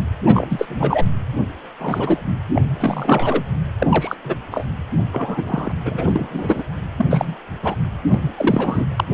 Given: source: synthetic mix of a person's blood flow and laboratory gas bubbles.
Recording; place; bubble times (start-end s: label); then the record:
Doppler ultrasound of blood flow; precordium
0.26-1.05 s: bubbles
1.79-2.23 s: bubbles
2.54-2.62 s: bubbles
2.73-3.43 s: bubbles
3.79-4.16 s: bubbles
4.24-4.34 s: bubbles
4.51-4.65 s: bubbles
5.12-5.72 s: bubbles
5.85-6.64 s: bubbles
6.97-7.06 s: bubbles
7.10-7.36 s: bubbles
7.62-7.75 s: bubbles
8.08-8.19 s: bubbles
8.36-8.84 s: bubbles
8.97-9.04 s: bubbles
From the record:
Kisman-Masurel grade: 243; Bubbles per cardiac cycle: several, 3 to 8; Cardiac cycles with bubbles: 100%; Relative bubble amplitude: loud (0.450 to 0.775); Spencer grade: 3 (all of the cardiac periods contain showers or single bubble signals, but not dominating or overriding the cardiac motion signals); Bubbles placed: anywhere in the cardiac cycle